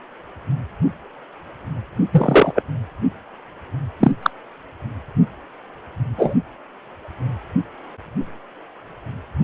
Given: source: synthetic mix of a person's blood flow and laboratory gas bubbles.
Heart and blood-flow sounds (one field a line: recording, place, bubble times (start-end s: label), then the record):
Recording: Doppler ultrasound of blood flow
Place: precordium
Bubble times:
2.11-2.52 s: bubbles
2.55-2.62 s: bubbles
4.00-4.12 s: bubbles
4.23-4.30 s: bubbles
6.18-6.35 s: bubbles
From the record:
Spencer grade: 2 (many but less than half of the cardiac periods contain bubble signals, singularly or in groups)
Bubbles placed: anywhere in the cardiac cycle